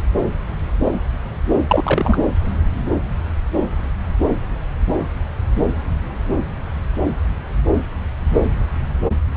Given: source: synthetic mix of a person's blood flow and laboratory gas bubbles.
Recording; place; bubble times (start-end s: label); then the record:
Doppler ultrasound of blood flow; subclavian vein
1.68-2.22 s: bubbles
From the record:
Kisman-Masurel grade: 113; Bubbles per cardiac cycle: 1 to 2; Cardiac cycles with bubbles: 1 to 10%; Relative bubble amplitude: loud (0.450 to 0.775); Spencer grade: 1 (occasional bubble signal discernible with the cardiac motion signal, with majority of cardiac periods free of bubbles); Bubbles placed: anywhere in the cardiac cycle